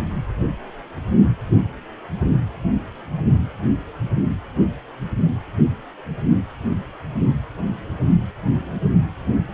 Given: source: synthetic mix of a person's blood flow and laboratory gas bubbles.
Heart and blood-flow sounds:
Doppler ultrasound of blood flow; precordium
no bubbles
From the record:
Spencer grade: 0 (complete lack of bubble signals)

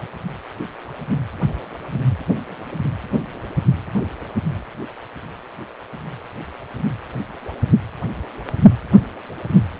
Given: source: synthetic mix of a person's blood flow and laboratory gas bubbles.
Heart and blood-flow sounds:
Doppler ultrasound of blood flow; precordium
no bubbles
From the record:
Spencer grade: 0 (complete lack of bubble signals)

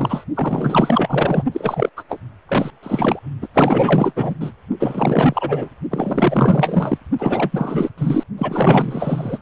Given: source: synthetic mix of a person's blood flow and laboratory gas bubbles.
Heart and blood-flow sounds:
Doppler ultrasound of blood flow; precordium
0.00-0.24 s: bubbles
0.34-1.44 s: bubbles
1.52-1.89 s: bubbles
1.96-2.03 s: bubbles
2.09-2.19 s: bubbles
2.49-2.71 s: bubbles
2.82-3.19 s: bubbles
3.42-3.48 s: bubbles
3.54-4.13 s: bubbles
4.16-4.35 s: bubbles
4.40-4.51 s: bubbles
4.79-5.71 s: bubbles
5.91-6.98 s: bubbles
7.19-7.90 s: bubbles
7.98-8.23 s: bubbles
8.38-9.38 s: bubbles
From the record:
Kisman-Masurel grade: 444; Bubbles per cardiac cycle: continuous sound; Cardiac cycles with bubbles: 100%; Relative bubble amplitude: maximal (0.775 to 0.999); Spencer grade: 4 (maximum detectable bubble signal sounding continuously throughout systole and diastole of every cardiac period, and overriding the amplitude of the normal cardiac signals); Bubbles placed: only in the low amplitude regions of the cardiac cycle

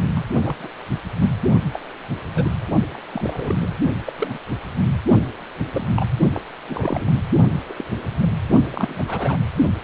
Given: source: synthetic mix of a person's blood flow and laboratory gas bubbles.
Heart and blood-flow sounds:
Doppler ultrasound of blood flow; precordium
0.15-0.25 s: bubbles
0.41-0.69 s: bubbles
1.19-1.30 s: bubbles
1.73-1.80 s: bubbles
2.35-2.48 s: bubbles
2.94-2.98 s: bubbles
3.13-3.56 s: bubbles
3.60-3.75 s: bubbles
4.06-4.38 s: bubbles
5.73-5.89 s: bubbles
5.97-6.06 s: bubbles
6.34-6.41 s: bubbles
6.69-7.14 s: bubbles
7.69-7.74 s: bubbles
7.78-7.84 s: bubbles
8.20-8.29 s: bubbles
8.72-9.04 s: bubbles
9.08-9.38 s: bubbles
From the record:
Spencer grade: 3 (all of the cardiac periods contain showers or single bubble signals, but not dominating or overriding the cardiac motion signals); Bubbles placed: only in the low amplitude regions of the cardiac cycle

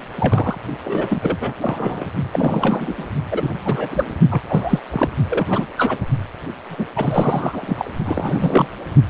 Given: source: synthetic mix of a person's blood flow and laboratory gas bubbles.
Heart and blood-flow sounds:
Doppler ultrasound of blood flow; precordium
0.15-0.57 s: bubbles
0.84-1.53 s: bubbles
1.61-2.06 s: bubbles
2.33-3.10 s: bubbles
3.31-3.51 s: bubbles
3.64-4.17 s: bubbles
4.30-4.42 s: bubbles
4.49-4.79 s: bubbles
4.91-5.09 s: bubbles
5.29-5.70 s: bubbles
5.77-5.98 s: bubbles
6.66-6.87 s: bubbles
6.96-7.90 s: bubbles
8.05-8.68 s: bubbles
From the record:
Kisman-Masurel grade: 342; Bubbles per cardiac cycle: rolling drumbeat, 9 or more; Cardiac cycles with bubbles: 100%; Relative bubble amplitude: moderate (0.250 to 0.450); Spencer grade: 3 (all of the cardiac periods contain showers or single bubble signals, but not dominating or overriding the cardiac motion signals); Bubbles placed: only in the low amplitude regions of the cardiac cycle

